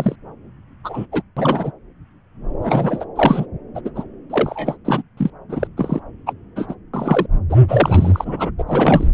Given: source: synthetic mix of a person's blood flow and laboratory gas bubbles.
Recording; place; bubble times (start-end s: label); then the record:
Doppler ultrasound of blood flow; subclavian vein
0.00-0.16 s: bubbles
0.84-1.06 s: bubbles
1.12-1.23 s: bubbles
1.36-1.71 s: bubbles
2.62-3.04 s: bubbles
3.16-3.46 s: bubbles
3.75-3.81 s: bubbles
3.84-3.90 s: bubbles
3.96-4.04 s: bubbles
4.29-4.76 s: bubbles
4.84-5.02 s: bubbles
5.17-5.30 s: bubbles
5.49-5.67 s: bubbles
5.77-6.00 s: bubbles
6.26-6.33 s: bubbles
6.55-6.75 s: bubbles
6.93-7.26 s: bubbles
7.50-7.57 s: bubbles
7.68-8.51 s: bubbles
8.58-8.63 s: bubbles
8.68-9.07 s: bubbles
From the record:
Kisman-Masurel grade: 233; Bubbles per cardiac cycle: several, 3 to 8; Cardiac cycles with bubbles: 50 to 99%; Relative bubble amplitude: loud (0.450 to 0.775); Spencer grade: 3 (all of the cardiac periods contain showers or single bubble signals, but not dominating or overriding the cardiac motion signals); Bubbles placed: anywhere in the cardiac cycle